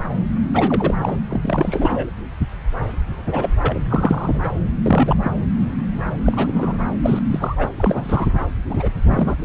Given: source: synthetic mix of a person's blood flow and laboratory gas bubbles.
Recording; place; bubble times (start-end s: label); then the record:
Doppler ultrasound of blood flow; subclavian vein
0.53-0.95 s: bubbles
1.01-1.17 s: bubbles
1.30-2.07 s: bubbles
3.27-3.54 s: bubbles
3.62-3.79 s: bubbles
3.90-4.49 s: bubbles
4.83-5.15 s: bubbles
5.23-5.32 s: bubbles
6.25-6.78 s: bubbles
7.03-7.19 s: bubbles
7.31-7.69 s: bubbles
7.77-8.27 s: bubbles
8.69-8.89 s: bubbles
9.10-9.35 s: bubbles
9.38-9.45 s: bubbles
From the record:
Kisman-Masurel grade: 233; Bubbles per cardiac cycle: several, 3 to 8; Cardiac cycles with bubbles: 50 to 99%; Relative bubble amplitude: loud (0.450 to 0.775); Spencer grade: 3 (all of the cardiac periods contain showers or single bubble signals, but not dominating or overriding the cardiac motion signals); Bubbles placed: anywhere in the cardiac cycle